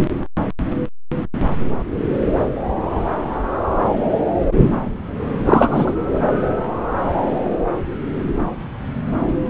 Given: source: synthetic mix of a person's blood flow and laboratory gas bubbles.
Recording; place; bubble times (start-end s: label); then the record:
Doppler ultrasound of blood flow; subclavian vein
5.45-5.94 s: bubbles
From the record:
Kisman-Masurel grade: 213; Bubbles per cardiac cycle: several, 3 to 8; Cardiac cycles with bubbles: 1 to 10%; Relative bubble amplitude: loud (0.450 to 0.775); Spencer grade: 1 (occasional bubble signal discernible with the cardiac motion signal, with majority of cardiac periods free of bubbles); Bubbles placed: anywhere in the cardiac cycle